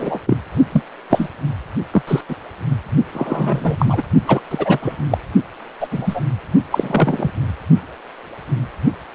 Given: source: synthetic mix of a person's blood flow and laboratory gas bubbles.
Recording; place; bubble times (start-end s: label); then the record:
Doppler ultrasound of blood flow; precordium
0.00-0.20 s: bubbles
0.26-0.37 s: bubbles
0.72-0.83 s: bubbles
1.10-1.29 s: bubbles
1.93-2.02 s: bubbles
2.07-2.21 s: bubbles
2.28-2.36 s: bubbles
3.14-4.03 s: bubbles
4.27-4.40 s: bubbles
4.50-4.79 s: bubbles
4.82-4.98 s: bubbles
5.10-5.18 s: bubbles
5.79-5.88 s: bubbles
5.91-6.21 s: bubbles
6.71-7.30 s: bubbles
From the record:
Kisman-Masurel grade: 233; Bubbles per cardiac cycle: several, 3 to 8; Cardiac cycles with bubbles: 50 to 99%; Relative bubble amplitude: loud (0.450 to 0.775); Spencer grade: 3 (all of the cardiac periods contain showers or single bubble signals, but not dominating or overriding the cardiac motion signals); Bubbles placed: only in the low amplitude regions of the cardiac cycle